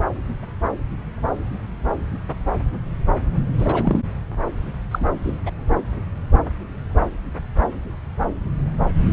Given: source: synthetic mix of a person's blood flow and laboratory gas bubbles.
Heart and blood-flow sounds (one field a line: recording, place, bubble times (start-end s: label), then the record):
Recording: Doppler ultrasound of blood flow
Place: subclavian vein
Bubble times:
3.58-4.00 s: bubbles
4.91-5.09 s: bubbles
5.23-5.38 s: bubbles
5.46-5.50 s: bubbles
From the record:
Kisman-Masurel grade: 212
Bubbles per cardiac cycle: several, 3 to 8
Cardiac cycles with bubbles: 1 to 10%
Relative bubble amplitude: moderate (0.250 to 0.450)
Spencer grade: 1 (occasional bubble signal discernible with the cardiac motion signal, with majority of cardiac periods free of bubbles)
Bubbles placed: anywhere in the cardiac cycle